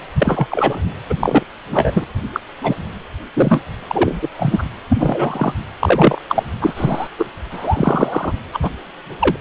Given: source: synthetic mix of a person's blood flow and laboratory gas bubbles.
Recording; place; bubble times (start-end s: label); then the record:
Doppler ultrasound of blood flow; precordium
0.19-0.47 s: bubbles
0.51-0.77 s: bubbles
1.09-1.15 s: bubbles
1.20-1.43 s: bubbles
1.72-2.04 s: bubbles
2.33-2.40 s: bubbles
2.61-2.77 s: bubbles
3.33-3.61 s: bubbles
3.88-4.29 s: bubbles
4.36-4.64 s: bubbles
4.88-5.53 s: bubbles
5.80-6.21 s: bubbles
6.28-6.43 s: bubbles
6.61-7.08 s: bubbles
7.18-7.25 s: bubbles
7.50-8.32 s: bubbles
8.53-8.70 s: bubbles
9.19-9.36 s: bubbles
From the record:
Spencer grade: 3 (all of the cardiac periods contain showers or single bubble signals, but not dominating or overriding the cardiac motion signals); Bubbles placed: anywhere in the cardiac cycle